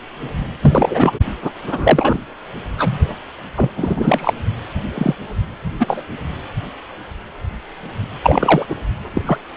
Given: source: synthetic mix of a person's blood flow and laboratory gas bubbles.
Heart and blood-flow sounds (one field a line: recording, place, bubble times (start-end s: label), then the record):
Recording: Doppler ultrasound of blood flow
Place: precordium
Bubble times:
0.61-1.11 s: bubbles
1.42-1.50 s: bubbles
1.65-2.19 s: bubbles
2.78-3.15 s: bubbles
3.56-3.70 s: bubbles
3.76-4.33 s: bubbles
4.94-5.16 s: bubbles
5.79-6.04 s: bubbles
8.22-8.66 s: bubbles
8.69-8.76 s: bubbles
9.13-9.21 s: bubbles
9.26-9.38 s: bubbles
From the record:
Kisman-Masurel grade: 233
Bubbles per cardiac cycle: several, 3 to 8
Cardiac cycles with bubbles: 50 to 99%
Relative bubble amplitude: loud (0.450 to 0.775)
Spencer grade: 3 (all of the cardiac periods contain showers or single bubble signals, but not dominating or overriding the cardiac motion signals)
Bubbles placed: anywhere in the cardiac cycle